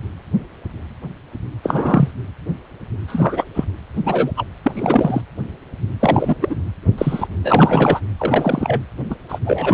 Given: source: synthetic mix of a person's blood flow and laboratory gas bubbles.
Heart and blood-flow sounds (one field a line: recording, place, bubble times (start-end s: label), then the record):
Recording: Doppler ultrasound of blood flow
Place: precordium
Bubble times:
1.63-2.11 s: bubbles
3.08-3.49 s: bubbles
3.54-3.65 s: bubbles
4.05-4.32 s: bubbles
4.37-4.45 s: bubbles
4.62-5.21 s: bubbles
6.00-6.36 s: bubbles
6.41-6.56 s: bubbles
6.98-7.28 s: bubbles
7.43-8.00 s: bubbles
8.18-8.80 s: bubbles
9.09-9.15 s: bubbles
9.29-9.39 s: bubbles
9.45-9.74 s: bubbles
From the record:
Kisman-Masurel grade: 233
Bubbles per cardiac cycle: several, 3 to 8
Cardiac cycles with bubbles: 50 to 99%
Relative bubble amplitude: loud (0.450 to 0.775)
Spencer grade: 3 (all of the cardiac periods contain showers or single bubble signals, but not dominating or overriding the cardiac motion signals)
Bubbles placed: anywhere in the cardiac cycle